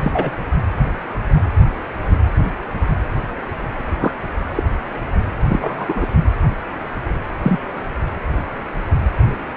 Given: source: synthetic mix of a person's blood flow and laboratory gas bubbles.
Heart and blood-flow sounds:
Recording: Doppler ultrasound of blood flow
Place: precordium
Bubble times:
0.02-0.31 s: bubbles
4.01-4.13 s: bubbles
4.56-4.63 s: bubbles
5.49-6.06 s: bubbles
7.42-7.59 s: bubbles
From the record:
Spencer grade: 2 (many but less than half of the cardiac periods contain bubble signals, singularly or in groups)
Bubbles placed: anywhere in the cardiac cycle

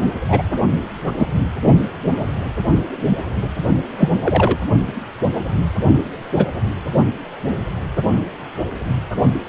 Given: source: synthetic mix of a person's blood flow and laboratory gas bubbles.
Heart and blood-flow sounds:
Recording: Doppler ultrasound of blood flow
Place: precordium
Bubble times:
0.28-0.43 s: bubbles
1.19-1.26 s: bubbles
3.98-4.09 s: bubbles
4.23-4.58 s: bubbles
6.37-6.46 s: bubbles
From the record:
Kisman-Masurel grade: 123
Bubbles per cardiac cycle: 1 to 2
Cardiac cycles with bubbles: 10 to 50%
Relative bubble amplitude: loud (0.450 to 0.775)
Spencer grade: 2 (many but less than half of the cardiac periods contain bubble signals, singularly or in groups)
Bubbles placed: only in the low amplitude regions of the cardiac cycle

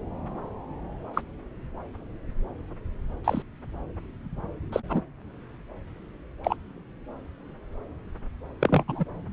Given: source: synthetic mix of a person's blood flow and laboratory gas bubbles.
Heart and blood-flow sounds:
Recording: Doppler ultrasound of blood flow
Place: subclavian vein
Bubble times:
1.14-1.21 s: bubbles
3.24-3.43 s: bubbles
4.72-4.80 s: bubbles
4.89-5.01 s: bubbles
6.43-6.55 s: bubbles
8.60-8.83 s: bubbles
8.88-9.04 s: bubbles
From the record:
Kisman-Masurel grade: 122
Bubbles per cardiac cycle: 1 to 2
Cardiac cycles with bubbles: 10 to 50%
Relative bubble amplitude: moderate (0.250 to 0.450)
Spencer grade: 2 (many but less than half of the cardiac periods contain bubble signals, singularly or in groups)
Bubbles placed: anywhere in the cardiac cycle

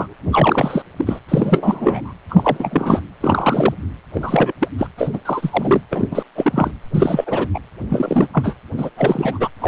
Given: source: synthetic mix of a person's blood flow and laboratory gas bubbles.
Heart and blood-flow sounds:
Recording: Doppler ultrasound of blood flow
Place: precordium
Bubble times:
0.00-0.15 s: bubbles
0.32-0.82 s: bubbles
0.96-1.20 s: bubbles
1.28-2.13 s: bubbles
2.29-3.02 s: bubbles
3.21-3.74 s: bubbles
4.13-4.52 s: bubbles
4.60-4.68 s: bubbles
4.78-4.87 s: bubbles
4.98-5.11 s: bubbles
5.13-5.19 s: bubbles
5.25-5.82 s: bubbles
5.91-6.08 s: bubbles
6.11-6.23 s: bubbles
6.36-6.71 s: bubbles
6.94-7.48 s: bubbles
7.54-7.59 s: bubbles
7.90-8.27 s: bubbles
8.33-8.55 s: bubbles
8.77-8.90 s: bubbles
8.96-9.49 s: bubbles
9.60-9.67 s: bubbles
From the record:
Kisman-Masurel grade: 343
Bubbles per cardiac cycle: rolling drumbeat, 9 or more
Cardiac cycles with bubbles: 100%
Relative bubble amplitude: loud (0.450 to 0.775)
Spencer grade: 3 (all of the cardiac periods contain showers or single bubble signals, but not dominating or overriding the cardiac motion signals)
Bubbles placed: anywhere in the cardiac cycle

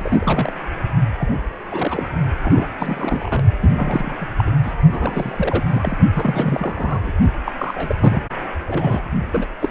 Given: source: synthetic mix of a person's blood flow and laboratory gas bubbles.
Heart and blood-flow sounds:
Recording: Doppler ultrasound of blood flow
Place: precordium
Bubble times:
0.00-0.53 s: bubbles
1.20-1.35 s: bubbles
1.71-2.07 s: bubbles
2.42-2.68 s: bubbles
2.79-3.42 s: bubbles
3.61-4.26 s: bubbles
4.38-4.50 s: bubbles
4.63-4.73 s: bubbles
4.90-5.63 s: bubbles
5.68-5.97 s: bubbles
6.13-7.00 s: bubbles
7.03-7.12 s: bubbles
7.44-7.52 s: bubbles
7.58-7.96 s: bubbles
8.00-8.27 s: bubbles
8.67-9.03 s: bubbles
9.32-9.46 s: bubbles
9.60-9.71 s: bubbles
From the record:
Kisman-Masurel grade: 332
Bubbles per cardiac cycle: rolling drumbeat, 9 or more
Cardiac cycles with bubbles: 50 to 99%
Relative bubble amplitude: moderate (0.250 to 0.450)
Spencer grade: 3 (all of the cardiac periods contain showers or single bubble signals, but not dominating or overriding the cardiac motion signals)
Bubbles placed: only in the low amplitude regions of the cardiac cycle

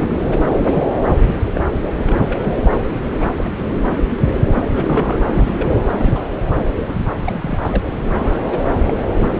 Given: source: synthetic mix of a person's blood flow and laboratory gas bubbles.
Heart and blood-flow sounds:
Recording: Doppler ultrasound of blood flow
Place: subclavian vein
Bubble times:
0.00-0.29 s: bubbles
0.57-0.84 s: bubbles
1.26-1.42 s: bubbles
1.54-1.61 s: bubbles
1.99-2.60 s: bubbles
2.65-2.72 s: bubbles
3.11-3.17 s: bubbles
3.19-3.33 s: bubbles
3.38-3.50 s: bubbles
3.73-3.82 s: bubbles
3.90-3.98 s: bubbles
4.56-4.62 s: bubbles
4.65-5.17 s: bubbles
5.27-5.77 s: bubbles
5.92-6.24 s: bubbles
6.88-6.95 s: bubbles
7.26-7.83 s: bubbles
8.04-8.42 s: bubbles
8.45-8.59 s: bubbles
8.72-8.78 s: bubbles
8.87-8.93 s: bubbles
9.05-9.07 s: bubbles
9.21-9.40 s: bubbles
From the record:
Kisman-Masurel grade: 232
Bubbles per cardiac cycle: several, 3 to 8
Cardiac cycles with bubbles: 50 to 99%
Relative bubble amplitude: moderate (0.250 to 0.450)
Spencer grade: 3 (all of the cardiac periods contain showers or single bubble signals, but not dominating or overriding the cardiac motion signals)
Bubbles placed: anywhere in the cardiac cycle

